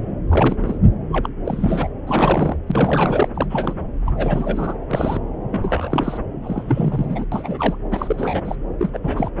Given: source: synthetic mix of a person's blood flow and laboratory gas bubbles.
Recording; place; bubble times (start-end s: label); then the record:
Doppler ultrasound of blood flow; subclavian vein
0.28-0.56 s: bubbles
0.60-0.78 s: bubbles
1.09-1.30 s: bubbles
1.45-1.89 s: bubbles
2.06-2.56 s: bubbles
2.67-3.28 s: bubbles
3.34-3.46 s: bubbles
3.49-3.74 s: bubbles
4.05-4.78 s: bubbles
4.91-5.20 s: bubbles
5.48-6.17 s: bubbles
6.42-7.26 s: bubbles
7.31-7.76 s: bubbles
7.91-8.55 s: bubbles
8.79-8.90 s: bubbles
8.93-8.98 s: bubbles
9.03-9.31 s: bubbles
From the record:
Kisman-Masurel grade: 332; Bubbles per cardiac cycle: rolling drumbeat, 9 or more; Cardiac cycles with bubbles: 50 to 99%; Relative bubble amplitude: moderate (0.250 to 0.450); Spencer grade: 3 (all of the cardiac periods contain showers or single bubble signals, but not dominating or overriding the cardiac motion signals); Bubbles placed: anywhere in the cardiac cycle